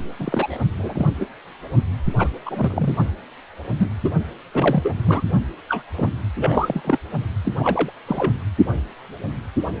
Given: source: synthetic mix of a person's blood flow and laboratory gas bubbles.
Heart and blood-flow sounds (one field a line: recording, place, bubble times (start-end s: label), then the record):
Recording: Doppler ultrasound of blood flow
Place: precordium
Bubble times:
0.19-0.57 s: bubbles
0.78-1.07 s: bubbles
1.19-1.26 s: bubbles
2.18-2.29 s: bubbles
2.46-2.95 s: bubbles
3.79-3.90 s: bubbles
4.04-4.09 s: bubbles
4.53-4.92 s: bubbles
5.04-5.23 s: bubbles
5.69-5.83 s: bubbles
5.96-6.09 s: bubbles
6.38-6.81 s: bubbles
6.84-6.98 s: bubbles
7.44-7.52 s: bubbles
7.58-7.91 s: bubbles
8.07-8.33 s: bubbles
From the record:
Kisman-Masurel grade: 232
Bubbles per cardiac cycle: several, 3 to 8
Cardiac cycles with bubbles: 50 to 99%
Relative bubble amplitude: moderate (0.250 to 0.450)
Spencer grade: 3 (all of the cardiac periods contain showers or single bubble signals, but not dominating or overriding the cardiac motion signals)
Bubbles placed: only in the low amplitude regions of the cardiac cycle